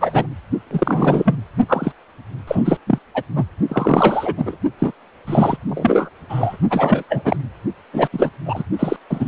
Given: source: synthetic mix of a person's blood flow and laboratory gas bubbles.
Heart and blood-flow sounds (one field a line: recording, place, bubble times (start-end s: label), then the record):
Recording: Doppler ultrasound of blood flow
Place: precordium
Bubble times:
0.00-0.28 s: bubbles
0.70-1.35 s: bubbles
1.69-1.92 s: bubbles
2.47-2.77 s: bubbles
2.87-2.98 s: bubbles
3.14-3.23 s: bubbles
3.35-3.44 s: bubbles
3.69-4.58 s: bubbles
4.79-4.92 s: bubbles
5.26-5.57 s: bubbles
5.68-6.09 s: bubbles
6.29-6.57 s: bubbles
6.70-7.03 s: bubbles
7.08-7.37 s: bubbles
7.93-8.09 s: bubbles
8.12-8.30 s: bubbles
8.46-8.63 s: bubbles
8.79-8.96 s: bubbles
9.10-9.28 s: bubbles
From the record:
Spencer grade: 3 (all of the cardiac periods contain showers or single bubble signals, but not dominating or overriding the cardiac motion signals)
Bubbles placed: only in the low amplitude regions of the cardiac cycle